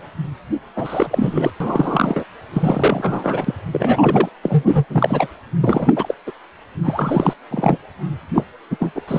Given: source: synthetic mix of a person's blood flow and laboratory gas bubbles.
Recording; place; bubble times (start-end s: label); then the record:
Doppler ultrasound of blood flow; precordium
0.00-0.08 s: bubbles
0.76-1.50 s: bubbles
1.60-2.24 s: bubbles
2.53-3.54 s: bubbles
3.72-4.29 s: bubbles
4.42-4.85 s: bubbles
4.89-5.27 s: bubbles
5.61-6.14 s: bubbles
6.26-6.32 s: bubbles
6.83-7.34 s: bubbles
7.51-7.78 s: bubbles
8.34-8.44 s: bubbles
8.71-8.77 s: bubbles
8.79-9.01 s: bubbles
9.07-9.19 s: bubbles
From the record:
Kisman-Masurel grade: 333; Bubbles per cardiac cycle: rolling drumbeat, 9 or more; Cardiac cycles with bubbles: 50 to 99%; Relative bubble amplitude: loud (0.450 to 0.775); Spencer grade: 3 (all of the cardiac periods contain showers or single bubble signals, but not dominating or overriding the cardiac motion signals); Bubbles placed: anywhere in the cardiac cycle